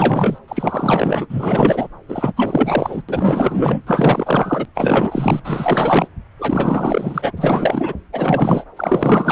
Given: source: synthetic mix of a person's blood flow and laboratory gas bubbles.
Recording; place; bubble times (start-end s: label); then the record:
Doppler ultrasound of blood flow; subclavian vein
0.00-0.39 s: bubbles
0.48-1.26 s: bubbles
1.29-1.87 s: bubbles
2.08-2.33 s: bubbles
2.36-3.03 s: bubbles
3.08-3.82 s: bubbles
3.87-4.66 s: bubbles
4.75-5.42 s: bubbles
5.44-6.08 s: bubbles
6.38-7.33 s: bubbles
7.36-7.93 s: bubbles
8.12-8.64 s: bubbles
8.77-9.32 s: bubbles
From the record:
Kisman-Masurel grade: 444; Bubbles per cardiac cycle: continuous sound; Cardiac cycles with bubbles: 100%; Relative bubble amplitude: maximal (0.775 to 0.999); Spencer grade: 4 (maximum detectable bubble signal sounding continuously throughout systole and diastole of every cardiac period, and overriding the amplitude of the normal cardiac signals); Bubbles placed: anywhere in the cardiac cycle